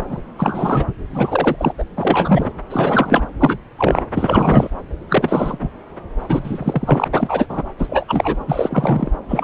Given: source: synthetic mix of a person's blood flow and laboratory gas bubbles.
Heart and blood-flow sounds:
Doppler ultrasound of blood flow; subclavian vein
0.07-0.21 s: bubbles
0.38-0.85 s: bubbles
1.12-1.73 s: bubbles
1.78-1.84 s: bubbles
1.97-2.52 s: bubbles
2.70-3.25 s: bubbles
3.40-3.58 s: bubbles
3.77-4.06 s: bubbles
4.14-4.70 s: bubbles
5.09-5.69 s: bubbles
6.19-7.08 s: bubbles
7.15-7.46 s: bubbles
7.49-7.62 s: bubbles
7.79-8.05 s: bubbles
8.08-8.37 s: bubbles
8.47-9.12 s: bubbles
9.29-9.44 s: bubbles
From the record:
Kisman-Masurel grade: 343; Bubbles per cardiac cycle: rolling drumbeat, 9 or more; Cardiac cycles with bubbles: 100%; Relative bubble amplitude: loud (0.450 to 0.775); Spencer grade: 3 (all of the cardiac periods contain showers or single bubble signals, but not dominating or overriding the cardiac motion signals); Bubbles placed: anywhere in the cardiac cycle

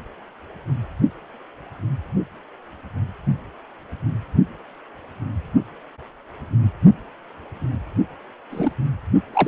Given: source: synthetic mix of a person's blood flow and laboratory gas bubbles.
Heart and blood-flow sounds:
Doppler ultrasound of blood flow; precordium
8.51-8.72 s: bubbles
9.33-9.48 s: bubbles
From the record:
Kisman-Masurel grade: 122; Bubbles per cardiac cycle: 1 to 2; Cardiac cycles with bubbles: 10 to 50%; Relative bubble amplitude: moderate (0.250 to 0.450); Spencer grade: 2 (many but less than half of the cardiac periods contain bubble signals, singularly or in groups); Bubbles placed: only in the low amplitude regions of the cardiac cycle

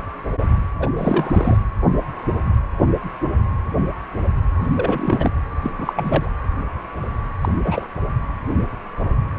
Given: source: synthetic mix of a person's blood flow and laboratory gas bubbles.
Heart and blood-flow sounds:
Doppler ultrasound of blood flow; precordium
0.79-0.89 s: bubbles
0.97-1.57 s: bubbles
4.56-4.68 s: bubbles
4.76-5.30 s: bubbles
5.62-5.71 s: bubbles
5.79-5.93 s: bubbles
5.96-6.33 s: bubbles
7.41-7.52 s: bubbles
7.64-7.86 s: bubbles
From the record:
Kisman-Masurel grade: 222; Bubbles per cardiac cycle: several, 3 to 8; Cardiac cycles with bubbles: 10 to 50%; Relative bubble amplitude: moderate (0.250 to 0.450); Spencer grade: 2 (many but less than half of the cardiac periods contain bubble signals, singularly or in groups); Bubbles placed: anywhere in the cardiac cycle

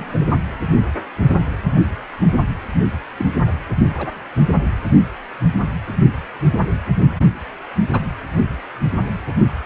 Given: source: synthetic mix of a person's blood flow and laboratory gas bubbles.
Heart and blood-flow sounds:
Doppler ultrasound of blood flow; precordium
0.00-0.38 s: bubbles
3.17-3.25 s: bubbles
3.99-4.09 s: bubbles
7.92-8.00 s: bubbles
From the record:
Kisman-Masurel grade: 122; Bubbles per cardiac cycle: 1 to 2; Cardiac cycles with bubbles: 10 to 50%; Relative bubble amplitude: moderate (0.250 to 0.450); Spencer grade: 2 (many but less than half of the cardiac periods contain bubble signals, singularly or in groups); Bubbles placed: only in the low amplitude regions of the cardiac cycle

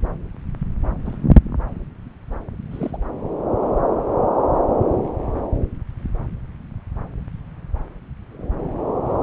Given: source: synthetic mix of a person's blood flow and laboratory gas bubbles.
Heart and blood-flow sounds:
Doppler ultrasound of blood flow; subclavian vein
1.05-1.24 s: bubbles
2.71-2.97 s: bubbles
From the record:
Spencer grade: 2 (many but less than half of the cardiac periods contain bubble signals, singularly or in groups); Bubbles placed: anywhere in the cardiac cycle

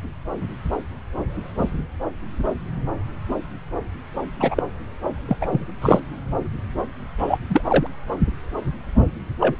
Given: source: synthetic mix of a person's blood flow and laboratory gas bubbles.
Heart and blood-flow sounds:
Doppler ultrasound of blood flow; subclavian vein
4.40-4.62 s: bubbles
5.28-5.37 s: bubbles
5.41-5.47 s: bubbles
5.50-5.66 s: bubbles
5.82-6.00 s: bubbles
7.17-7.38 s: bubbles
7.49-7.87 s: bubbles
9.40-9.56 s: bubbles
From the record:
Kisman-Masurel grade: 223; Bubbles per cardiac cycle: several, 3 to 8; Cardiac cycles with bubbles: 10 to 50%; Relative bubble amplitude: loud (0.450 to 0.775); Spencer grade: 2 (many but less than half of the cardiac periods contain bubble signals, singularly or in groups); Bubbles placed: anywhere in the cardiac cycle

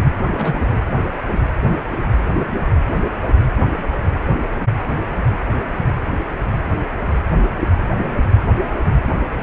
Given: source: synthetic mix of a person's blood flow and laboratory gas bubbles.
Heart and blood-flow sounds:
Doppler ultrasound of blood flow; precordium
0.23-0.81 s: bubbles
From the record:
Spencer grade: 1 (occasional bubble signal discernible with the cardiac motion signal, with majority of cardiac periods free of bubbles); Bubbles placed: anywhere in the cardiac cycle

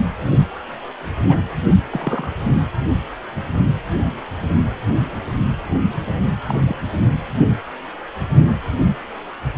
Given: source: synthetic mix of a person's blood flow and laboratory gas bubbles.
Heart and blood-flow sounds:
Doppler ultrasound of blood flow; precordium
1.28-1.42 s: bubbles
1.90-2.32 s: bubbles
6.49-6.59 s: bubbles
6.65-6.76 s: bubbles
From the record:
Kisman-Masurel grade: 122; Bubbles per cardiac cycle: 1 to 2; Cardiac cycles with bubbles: 10 to 50%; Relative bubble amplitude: moderate (0.250 to 0.450); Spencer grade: 2 (many but less than half of the cardiac periods contain bubble signals, singularly or in groups); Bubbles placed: only in the low amplitude regions of the cardiac cycle

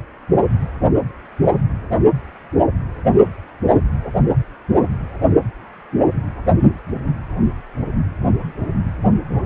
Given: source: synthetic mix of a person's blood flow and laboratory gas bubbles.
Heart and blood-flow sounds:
Doppler ultrasound of blood flow; precordium
no bubbles
From the record:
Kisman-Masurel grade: 000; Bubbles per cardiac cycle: 0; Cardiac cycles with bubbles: 0%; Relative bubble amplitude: no bubbles discernible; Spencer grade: 0 (complete lack of bubble signals)

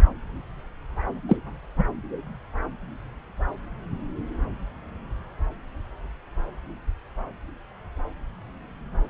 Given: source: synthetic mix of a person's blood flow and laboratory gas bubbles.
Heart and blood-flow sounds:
Doppler ultrasound of blood flow; subclavian vein
1.28-1.36 s: bubbles
1.78-1.84 s: bubbles
From the record:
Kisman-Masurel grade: 112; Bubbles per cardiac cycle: 1 to 2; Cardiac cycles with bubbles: 1 to 10%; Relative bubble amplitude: moderate (0.250 to 0.450); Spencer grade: 1 (occasional bubble signal discernible with the cardiac motion signal, with majority of cardiac periods free of bubbles); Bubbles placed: anywhere in the cardiac cycle

